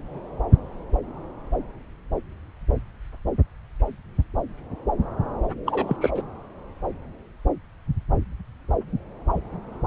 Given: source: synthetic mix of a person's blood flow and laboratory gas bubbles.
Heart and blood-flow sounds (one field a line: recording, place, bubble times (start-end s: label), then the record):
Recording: Doppler ultrasound of blood flow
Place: subclavian vein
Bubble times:
5.67-5.96 s: bubbles
6.01-6.11 s: bubbles
6.15-6.23 s: bubbles
From the record:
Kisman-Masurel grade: 212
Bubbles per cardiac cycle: several, 3 to 8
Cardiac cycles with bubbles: 1 to 10%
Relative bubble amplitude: moderate (0.250 to 0.450)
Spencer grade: 1 (occasional bubble signal discernible with the cardiac motion signal, with majority of cardiac periods free of bubbles)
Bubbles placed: anywhere in the cardiac cycle